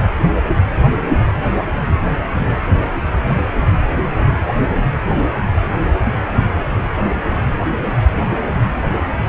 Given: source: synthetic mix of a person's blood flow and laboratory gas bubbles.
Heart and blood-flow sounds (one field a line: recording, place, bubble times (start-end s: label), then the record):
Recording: Doppler ultrasound of blood flow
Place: precordium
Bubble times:
no bubbles
From the record:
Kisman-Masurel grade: 000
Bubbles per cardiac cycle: 0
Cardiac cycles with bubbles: 0%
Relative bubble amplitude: no bubbles discernible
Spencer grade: 0 (complete lack of bubble signals)